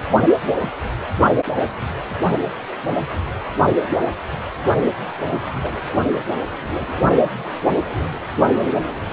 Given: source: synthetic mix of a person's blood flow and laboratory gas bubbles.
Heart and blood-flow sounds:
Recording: Doppler ultrasound of blood flow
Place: precordium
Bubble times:
5.44-5.81 s: bubbles
From the record:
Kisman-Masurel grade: 221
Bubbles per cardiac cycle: several, 3 to 8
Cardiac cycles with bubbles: 10 to 50%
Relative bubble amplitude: barely perceptible (0.100 to 0.250)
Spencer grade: 2 (many but less than half of the cardiac periods contain bubble signals, singularly or in groups)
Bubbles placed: anywhere in the cardiac cycle

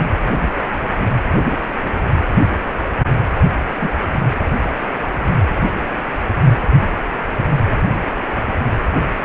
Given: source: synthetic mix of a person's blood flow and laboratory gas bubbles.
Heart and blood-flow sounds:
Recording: Doppler ultrasound of blood flow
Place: precordium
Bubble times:
3.81-3.88 s: bubbles
From the record:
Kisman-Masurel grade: 123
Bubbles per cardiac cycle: 1 to 2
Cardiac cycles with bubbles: 10 to 50%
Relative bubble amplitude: loud (0.450 to 0.775)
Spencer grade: 2 (many but less than half of the cardiac periods contain bubble signals, singularly or in groups)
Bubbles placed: anywhere in the cardiac cycle

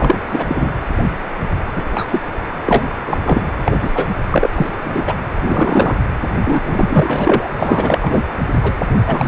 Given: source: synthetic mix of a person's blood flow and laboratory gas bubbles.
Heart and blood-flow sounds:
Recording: Doppler ultrasound of blood flow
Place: precordium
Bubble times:
0.00-0.25 s: bubbles
0.29-0.71 s: bubbles
1.76-1.83 s: bubbles
1.93-2.07 s: bubbles
2.11-2.21 s: bubbles
2.65-2.83 s: bubbles
3.05-3.48 s: bubbles
3.65-3.78 s: bubbles
3.81-3.90 s: bubbles
3.94-4.11 s: bubbles
4.30-4.48 s: bubbles
4.54-4.76 s: bubbles
4.84-5.02 s: bubbles
5.07-5.14 s: bubbles
5.41-5.96 s: bubbles
6.44-6.61 s: bubbles
6.65-7.48 s: bubbles
7.59-7.99 s: bubbles
8.02-8.23 s: bubbles
8.62-8.74 s: bubbles
9.07-9.27 s: bubbles
From the record:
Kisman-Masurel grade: 233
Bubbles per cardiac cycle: several, 3 to 8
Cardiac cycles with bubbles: 50 to 99%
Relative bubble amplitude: loud (0.450 to 0.775)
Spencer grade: 3 (all of the cardiac periods contain showers or single bubble signals, but not dominating or overriding the cardiac motion signals)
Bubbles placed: anywhere in the cardiac cycle

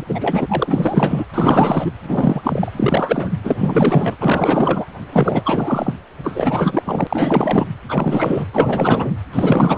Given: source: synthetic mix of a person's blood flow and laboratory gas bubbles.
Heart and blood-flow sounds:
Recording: Doppler ultrasound of blood flow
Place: precordium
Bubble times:
0.00-0.04 s: bubbles
0.08-1.25 s: bubbles
1.33-1.92 s: bubbles
2.02-2.71 s: bubbles
2.77-3.33 s: bubbles
3.44-4.17 s: bubbles
4.20-4.86 s: bubbles
5.12-5.93 s: bubbles
6.23-7.67 s: bubbles
7.88-8.45 s: bubbles
8.53-9.12 s: bubbles
9.33-9.78 s: bubbles
From the record:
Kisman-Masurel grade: 444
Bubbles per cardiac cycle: continuous sound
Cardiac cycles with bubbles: 100%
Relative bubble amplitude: maximal (0.775 to 0.999)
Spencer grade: 4 (maximum detectable bubble signal sounding continuously throughout systole and diastole of every cardiac period, and overriding the amplitude of the normal cardiac signals)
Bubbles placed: anywhere in the cardiac cycle

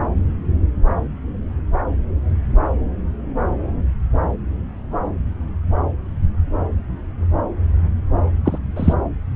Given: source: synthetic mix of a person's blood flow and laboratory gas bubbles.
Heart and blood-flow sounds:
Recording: Doppler ultrasound of blood flow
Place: subclavian vein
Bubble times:
8.44-8.58 s: bubbles
8.76-8.93 s: bubbles
From the record:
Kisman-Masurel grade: 123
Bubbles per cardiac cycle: 1 to 2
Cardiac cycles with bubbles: 10 to 50%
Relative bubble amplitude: loud (0.450 to 0.775)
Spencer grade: 2 (many but less than half of the cardiac periods contain bubble signals, singularly or in groups)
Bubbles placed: anywhere in the cardiac cycle

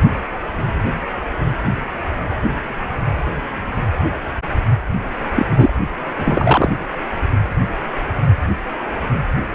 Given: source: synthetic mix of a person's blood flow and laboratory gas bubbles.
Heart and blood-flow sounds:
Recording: Doppler ultrasound of blood flow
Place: precordium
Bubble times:
5.36-5.46 s: bubbles
5.50-5.73 s: bubbles
6.18-6.71 s: bubbles
From the record:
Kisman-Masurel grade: 213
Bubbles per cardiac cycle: several, 3 to 8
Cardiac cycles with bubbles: 1 to 10%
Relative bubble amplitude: loud (0.450 to 0.775)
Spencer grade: 1 (occasional bubble signal discernible with the cardiac motion signal, with majority of cardiac periods free of bubbles)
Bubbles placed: anywhere in the cardiac cycle

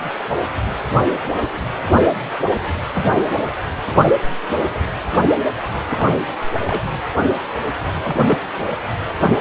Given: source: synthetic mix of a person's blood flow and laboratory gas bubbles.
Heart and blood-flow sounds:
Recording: Doppler ultrasound of blood flow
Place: precordium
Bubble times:
2.94-3.17 s: bubbles
5.88-6.37 s: bubbles
6.67-6.81 s: bubbles
8.03-8.17 s: bubbles
8.26-8.38 s: bubbles
From the record:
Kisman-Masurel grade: 122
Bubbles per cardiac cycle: 1 to 2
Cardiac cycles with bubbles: 10 to 50%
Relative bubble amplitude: moderate (0.250 to 0.450)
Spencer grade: 2 (many but less than half of the cardiac periods contain bubble signals, singularly or in groups)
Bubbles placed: anywhere in the cardiac cycle

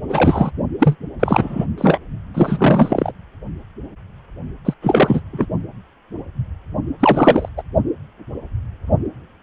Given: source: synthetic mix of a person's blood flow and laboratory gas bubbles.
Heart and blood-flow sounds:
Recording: Doppler ultrasound of blood flow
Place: precordium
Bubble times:
0.08-0.51 s: bubbles
0.79-0.96 s: bubbles
1.19-1.66 s: bubbles
1.77-1.98 s: bubbles
2.34-3.12 s: bubbles
4.64-4.74 s: bubbles
4.82-5.20 s: bubbles
5.32-5.46 s: bubbles
6.99-7.49 s: bubbles
7.57-7.62 s: bubbles
From the record:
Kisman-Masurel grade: 333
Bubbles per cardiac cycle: rolling drumbeat, 9 or more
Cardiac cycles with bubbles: 50 to 99%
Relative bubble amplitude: loud (0.450 to 0.775)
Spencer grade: 3 (all of the cardiac periods contain showers or single bubble signals, but not dominating or overriding the cardiac motion signals)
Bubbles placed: only in the low amplitude regions of the cardiac cycle

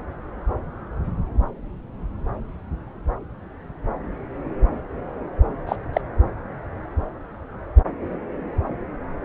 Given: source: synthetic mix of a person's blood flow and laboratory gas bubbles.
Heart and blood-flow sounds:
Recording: Doppler ultrasound of blood flow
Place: subclavian vein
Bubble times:
5.67-5.76 s: bubbles
5.93-6.01 s: bubbles
From the record:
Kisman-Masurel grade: 122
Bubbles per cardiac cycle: 1 to 2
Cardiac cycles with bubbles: 10 to 50%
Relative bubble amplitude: moderate (0.250 to 0.450)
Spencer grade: 2 (many but less than half of the cardiac periods contain bubble signals, singularly or in groups)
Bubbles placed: anywhere in the cardiac cycle

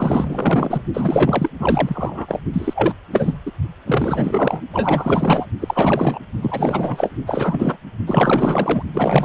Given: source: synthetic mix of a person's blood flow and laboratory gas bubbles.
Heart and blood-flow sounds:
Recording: Doppler ultrasound of blood flow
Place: precordium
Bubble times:
0.00-0.81 s: bubbles
0.94-1.50 s: bubbles
1.58-2.42 s: bubbles
2.53-2.93 s: bubbles
3.12-3.34 s: bubbles
3.46-3.52 s: bubbles
3.87-4.61 s: bubbles
4.73-5.46 s: bubbles
5.61-6.19 s: bubbles
6.41-7.11 s: bubbles
7.27-7.78 s: bubbles
8.06-8.83 s: bubbles
8.93-9.25 s: bubbles
From the record:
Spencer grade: 4 (maximum detectable bubble signal sounding continuously throughout systole and diastole of every cardiac period, and overriding the amplitude of the normal cardiac signals)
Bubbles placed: only in the low amplitude regions of the cardiac cycle

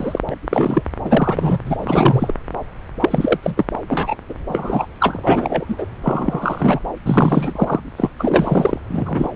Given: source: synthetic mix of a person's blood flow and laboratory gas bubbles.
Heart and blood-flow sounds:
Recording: Doppler ultrasound of blood flow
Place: subclavian vein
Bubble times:
0.00-0.20 s: bubbles
0.28-0.36 s: bubbles
0.50-0.82 s: bubbles
1.04-1.59 s: bubbles
1.66-2.35 s: bubbles
3.00-3.38 s: bubbles
3.43-3.65 s: bubbles
3.89-4.15 s: bubbles
4.29-4.34 s: bubbles
4.48-4.86 s: bubbles
4.99-5.20 s: bubbles
5.22-5.65 s: bubbles
5.68-5.86 s: bubbles
6.03-6.79 s: bubbles
7.04-7.80 s: bubbles
7.96-8.10 s: bubbles
8.19-8.79 s: bubbles
8.89-9.28 s: bubbles
From the record:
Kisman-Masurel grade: 343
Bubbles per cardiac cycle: rolling drumbeat, 9 or more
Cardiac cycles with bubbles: 100%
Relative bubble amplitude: loud (0.450 to 0.775)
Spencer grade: 3 (all of the cardiac periods contain showers or single bubble signals, but not dominating or overriding the cardiac motion signals)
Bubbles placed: anywhere in the cardiac cycle

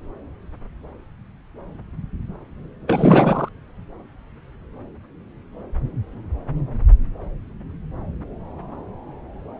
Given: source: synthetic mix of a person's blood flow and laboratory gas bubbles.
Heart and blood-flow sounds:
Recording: Doppler ultrasound of blood flow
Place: subclavian vein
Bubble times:
2.87-3.48 s: bubbles
From the record:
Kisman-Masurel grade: 213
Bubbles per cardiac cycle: several, 3 to 8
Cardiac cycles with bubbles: 1 to 10%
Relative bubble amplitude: loud (0.450 to 0.775)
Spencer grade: 1 (occasional bubble signal discernible with the cardiac motion signal, with majority of cardiac periods free of bubbles)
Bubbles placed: anywhere in the cardiac cycle

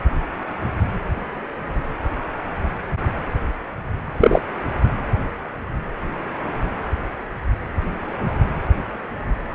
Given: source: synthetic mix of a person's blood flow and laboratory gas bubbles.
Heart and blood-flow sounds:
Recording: Doppler ultrasound of blood flow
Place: precordium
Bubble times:
4.20-4.41 s: bubbles
From the record:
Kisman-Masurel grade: 113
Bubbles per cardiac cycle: 1 to 2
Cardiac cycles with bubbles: 1 to 10%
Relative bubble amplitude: loud (0.450 to 0.775)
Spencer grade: 1 (occasional bubble signal discernible with the cardiac motion signal, with majority of cardiac periods free of bubbles)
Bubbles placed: anywhere in the cardiac cycle

